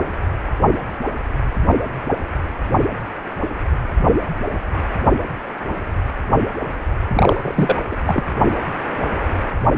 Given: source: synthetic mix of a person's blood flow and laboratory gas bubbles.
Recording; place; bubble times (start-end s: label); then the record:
Doppler ultrasound of blood flow; precordium
7.13-7.79 s: bubbles
7.91-7.96 s: bubbles
8.06-8.25 s: bubbles
From the record:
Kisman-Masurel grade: 223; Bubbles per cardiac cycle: several, 3 to 8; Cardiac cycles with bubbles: 10 to 50%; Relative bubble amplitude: loud (0.450 to 0.775); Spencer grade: 2 (many but less than half of the cardiac periods contain bubble signals, singularly or in groups); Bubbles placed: only in the low amplitude regions of the cardiac cycle